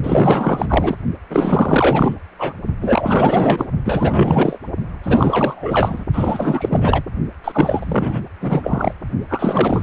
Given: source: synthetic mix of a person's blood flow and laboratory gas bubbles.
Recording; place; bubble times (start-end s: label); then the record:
Doppler ultrasound of blood flow; precordium
0.03-0.97 s: bubbles
1.30-2.15 s: bubbles
2.38-2.53 s: bubbles
2.81-3.65 s: bubbles
3.84-4.58 s: bubbles
5.04-6.04 s: bubbles
6.13-7.03 s: bubbles
7.44-8.22 s: bubbles
8.41-8.94 s: bubbles
9.28-9.83 s: bubbles
From the record:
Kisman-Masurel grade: 444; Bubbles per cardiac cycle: continuous sound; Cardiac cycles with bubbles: 100%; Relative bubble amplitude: maximal (0.775 to 0.999); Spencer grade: 4 (maximum detectable bubble signal sounding continuously throughout systole and diastole of every cardiac period, and overriding the amplitude of the normal cardiac signals); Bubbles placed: only in the low amplitude regions of the cardiac cycle